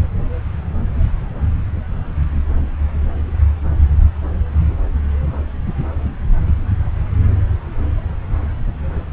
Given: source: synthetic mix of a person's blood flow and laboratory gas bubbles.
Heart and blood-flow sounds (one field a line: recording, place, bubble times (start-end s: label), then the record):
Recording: Doppler ultrasound of blood flow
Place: subclavian vein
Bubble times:
no bubbles
From the record:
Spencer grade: 0 (complete lack of bubble signals)